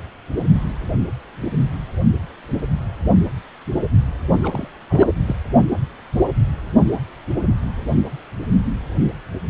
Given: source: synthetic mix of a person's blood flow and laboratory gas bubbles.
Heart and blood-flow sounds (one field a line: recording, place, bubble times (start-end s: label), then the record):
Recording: Doppler ultrasound of blood flow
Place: precordium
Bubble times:
4.42-4.68 s: bubbles
4.89-5.08 s: bubbles
5.27-5.35 s: bubbles
From the record:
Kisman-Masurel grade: 221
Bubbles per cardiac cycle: several, 3 to 8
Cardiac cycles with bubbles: 10 to 50%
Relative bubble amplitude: barely perceptible (0.100 to 0.250)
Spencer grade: 2 (many but less than half of the cardiac periods contain bubble signals, singularly or in groups)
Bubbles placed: only in the low amplitude regions of the cardiac cycle